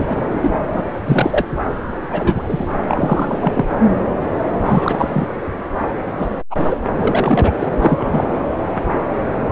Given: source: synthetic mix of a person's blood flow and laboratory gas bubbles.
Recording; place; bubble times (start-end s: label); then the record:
Doppler ultrasound of blood flow; subclavian vein
0.00-0.36 s: bubbles
0.41-0.51 s: bubbles
0.73-0.84 s: bubbles
1.06-1.46 s: bubbles
2.03-2.67 s: bubbles
2.88-3.65 s: bubbles
4.65-5.28 s: bubbles
6.18-6.27 s: bubbles
6.50-6.82 s: bubbles
6.98-7.52 s: bubbles
7.61-7.67 s: bubbles
7.81-8.24 s: bubbles
From the record:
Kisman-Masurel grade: 233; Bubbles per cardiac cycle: several, 3 to 8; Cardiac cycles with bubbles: 50 to 99%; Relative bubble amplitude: loud (0.450 to 0.775); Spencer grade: 3 (all of the cardiac periods contain showers or single bubble signals, but not dominating or overriding the cardiac motion signals); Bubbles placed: anywhere in the cardiac cycle